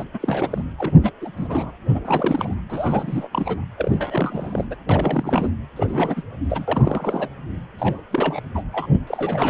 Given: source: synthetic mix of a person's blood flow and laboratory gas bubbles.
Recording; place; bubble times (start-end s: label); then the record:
Doppler ultrasound of blood flow; precordium
0.00-0.04 s: bubbles
0.13-0.62 s: bubbles
0.78-0.94 s: bubbles
1.02-1.12 s: bubbles
1.21-1.31 s: bubbles
1.36-1.71 s: bubbles
1.88-2.00 s: bubbles
2.04-2.54 s: bubbles
2.69-3.27 s: bubbles
3.32-3.65 s: bubbles
3.78-4.65 s: bubbles
4.71-4.75 s: bubbles
4.89-5.50 s: bubbles
5.76-6.22 s: bubbles
6.49-7.29 s: bubbles
7.78-8.02 s: bubbles
8.11-8.41 s: bubbles
8.54-8.63 s: bubbles
8.72-8.88 s: bubbles
8.91-9.02 s: bubbles
9.07-9.50 s: bubbles
From the record:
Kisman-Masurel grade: 342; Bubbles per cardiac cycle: rolling drumbeat, 9 or more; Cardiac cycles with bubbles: 100%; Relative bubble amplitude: moderate (0.250 to 0.450); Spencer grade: 3 (all of the cardiac periods contain showers or single bubble signals, but not dominating or overriding the cardiac motion signals); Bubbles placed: anywhere in the cardiac cycle